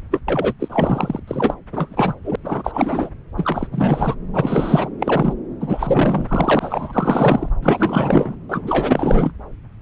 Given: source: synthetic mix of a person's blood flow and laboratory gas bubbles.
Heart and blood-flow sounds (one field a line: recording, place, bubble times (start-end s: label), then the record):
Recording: Doppler ultrasound of blood flow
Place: subclavian vein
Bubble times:
0.10-0.19 s: bubbles
0.28-0.54 s: bubbles
0.59-1.20 s: bubbles
1.27-1.54 s: bubbles
1.72-2.14 s: bubbles
2.25-2.35 s: bubbles
2.44-3.10 s: bubbles
3.37-3.67 s: bubbles
3.71-4.16 s: bubbles
4.33-4.90 s: bubbles
5.00-5.34 s: bubbles
5.60-7.49 s: bubbles
7.62-8.35 s: bubbles
8.49-9.33 s: bubbles
From the record:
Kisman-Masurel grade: 444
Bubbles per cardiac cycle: continuous sound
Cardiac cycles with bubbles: 100%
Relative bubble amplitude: maximal (0.775 to 0.999)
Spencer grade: 4 (maximum detectable bubble signal sounding continuously throughout systole and diastole of every cardiac period, and overriding the amplitude of the normal cardiac signals)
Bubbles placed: anywhere in the cardiac cycle